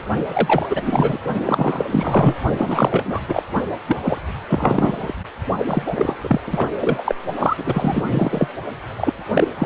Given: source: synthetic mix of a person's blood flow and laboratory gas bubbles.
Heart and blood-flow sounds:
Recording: Doppler ultrasound of blood flow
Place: precordium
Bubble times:
0.28-1.20 s: bubbles
1.44-1.85 s: bubbles
1.90-2.40 s: bubbles
2.58-3.19 s: bubbles
3.27-3.42 s: bubbles
3.86-3.96 s: bubbles
4.03-4.21 s: bubbles
4.47-5.14 s: bubbles
5.58-6.17 s: bubbles
6.23-6.41 s: bubbles
6.47-6.69 s: bubbles
6.80-7.15 s: bubbles
7.37-8.04 s: bubbles
8.08-8.48 s: bubbles
8.97-9.14 s: bubbles
9.35-9.48 s: bubbles
9.57-9.66 s: bubbles
From the record:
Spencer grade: 4 (maximum detectable bubble signal sounding continuously throughout systole and diastole of every cardiac period, and overriding the amplitude of the normal cardiac signals)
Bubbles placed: only in the low amplitude regions of the cardiac cycle

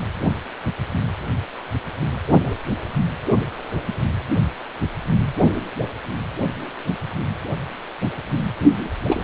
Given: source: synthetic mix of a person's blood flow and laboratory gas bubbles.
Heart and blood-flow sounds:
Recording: Doppler ultrasound of blood flow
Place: precordium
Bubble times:
9.07-9.24 s: bubbles
From the record:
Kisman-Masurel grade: 222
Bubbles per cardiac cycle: several, 3 to 8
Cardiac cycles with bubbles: 10 to 50%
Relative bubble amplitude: moderate (0.250 to 0.450)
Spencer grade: 2 (many but less than half of the cardiac periods contain bubble signals, singularly or in groups)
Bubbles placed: anywhere in the cardiac cycle

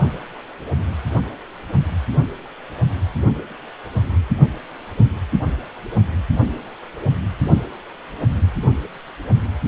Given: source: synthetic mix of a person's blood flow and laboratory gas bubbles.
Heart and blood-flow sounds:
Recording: Doppler ultrasound of blood flow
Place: precordium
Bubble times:
no bubbles
From the record:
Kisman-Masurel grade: 000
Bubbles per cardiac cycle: 0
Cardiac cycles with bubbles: 0%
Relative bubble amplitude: no bubbles discernible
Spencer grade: 0 (complete lack of bubble signals)

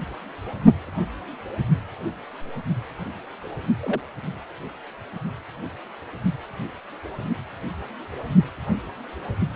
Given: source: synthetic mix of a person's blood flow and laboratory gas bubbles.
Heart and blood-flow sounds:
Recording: Doppler ultrasound of blood flow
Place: precordium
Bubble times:
3.80-4.01 s: bubbles
From the record:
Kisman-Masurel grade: 111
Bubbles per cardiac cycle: 1 to 2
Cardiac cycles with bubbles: 1 to 10%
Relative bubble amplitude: barely perceptible (0.100 to 0.250)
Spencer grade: 1 (occasional bubble signal discernible with the cardiac motion signal, with majority of cardiac periods free of bubbles)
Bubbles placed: only in the low amplitude regions of the cardiac cycle

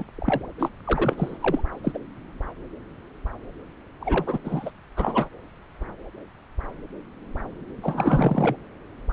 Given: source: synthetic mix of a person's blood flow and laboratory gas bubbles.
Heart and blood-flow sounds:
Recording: Doppler ultrasound of blood flow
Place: subclavian vein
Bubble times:
0.00-0.04 s: bubbles
0.17-0.47 s: bubbles
0.58-0.69 s: bubbles
0.84-1.38 s: bubbles
1.40-1.61 s: bubbles
1.83-1.98 s: bubbles
4.00-4.38 s: bubbles
4.44-4.71 s: bubbles
4.97-5.29 s: bubbles
7.82-8.56 s: bubbles
From the record:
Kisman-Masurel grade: 332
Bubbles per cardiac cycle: rolling drumbeat, 9 or more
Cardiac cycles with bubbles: 50 to 99%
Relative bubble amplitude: moderate (0.250 to 0.450)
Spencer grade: 3 (all of the cardiac periods contain showers or single bubble signals, but not dominating or overriding the cardiac motion signals)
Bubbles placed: anywhere in the cardiac cycle

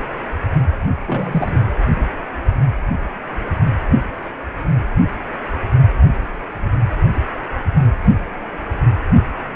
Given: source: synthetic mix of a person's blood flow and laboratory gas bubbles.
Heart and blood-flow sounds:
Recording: Doppler ultrasound of blood flow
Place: precordium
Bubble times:
1.05-1.60 s: bubbles
From the record:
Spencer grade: 1 (occasional bubble signal discernible with the cardiac motion signal, with majority of cardiac periods free of bubbles)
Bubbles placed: anywhere in the cardiac cycle

